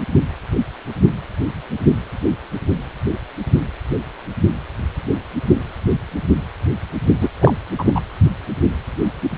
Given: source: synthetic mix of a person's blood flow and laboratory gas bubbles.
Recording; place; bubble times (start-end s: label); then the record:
Doppler ultrasound of blood flow; precordium
7.21-7.29 s: bubbles
7.41-7.56 s: bubbles
7.78-8.01 s: bubbles
From the record:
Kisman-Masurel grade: 213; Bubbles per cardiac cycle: several, 3 to 8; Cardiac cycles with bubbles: 1 to 10%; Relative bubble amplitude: loud (0.450 to 0.775); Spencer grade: 1 (occasional bubble signal discernible with the cardiac motion signal, with majority of cardiac periods free of bubbles); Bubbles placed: only in the low amplitude regions of the cardiac cycle